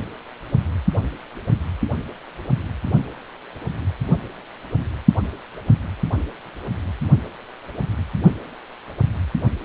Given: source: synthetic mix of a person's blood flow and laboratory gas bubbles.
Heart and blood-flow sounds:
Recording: Doppler ultrasound of blood flow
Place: precordium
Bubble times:
no bubbles
From the record:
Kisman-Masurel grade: 000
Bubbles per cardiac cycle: 0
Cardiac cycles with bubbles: 0%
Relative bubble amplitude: no bubbles discernible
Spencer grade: 0 (complete lack of bubble signals)

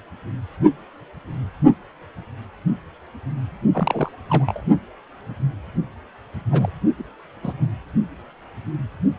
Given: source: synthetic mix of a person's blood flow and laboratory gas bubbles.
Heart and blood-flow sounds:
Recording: Doppler ultrasound of blood flow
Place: precordium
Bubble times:
3.73-4.11 s: bubbles
4.29-4.63 s: bubbles
6.50-6.69 s: bubbles
6.98-7.04 s: bubbles
7.43-7.67 s: bubbles
From the record:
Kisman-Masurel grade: 222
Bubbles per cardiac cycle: several, 3 to 8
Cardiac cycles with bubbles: 10 to 50%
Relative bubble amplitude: moderate (0.250 to 0.450)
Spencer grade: 2 (many but less than half of the cardiac periods contain bubble signals, singularly or in groups)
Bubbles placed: only in the low amplitude regions of the cardiac cycle

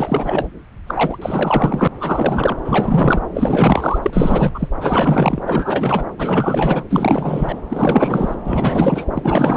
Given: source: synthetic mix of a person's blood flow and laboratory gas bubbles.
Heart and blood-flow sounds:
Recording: Doppler ultrasound of blood flow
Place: subclavian vein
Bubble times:
0.00-0.48 s: bubbles
0.86-1.18 s: bubbles
1.22-1.87 s: bubbles
1.99-2.57 s: bubbles
2.64-3.21 s: bubbles
3.34-3.98 s: bubbles
4.02-4.68 s: bubbles
4.80-5.42 s: bubbles
5.46-6.04 s: bubbles
6.18-6.84 s: bubbles
6.89-7.61 s: bubbles
7.69-8.35 s: bubbles
8.46-9.05 s: bubbles
9.13-9.57 s: bubbles
From the record:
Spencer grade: 4 (maximum detectable bubble signal sounding continuously throughout systole and diastole of every cardiac period, and overriding the amplitude of the normal cardiac signals)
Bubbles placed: anywhere in the cardiac cycle

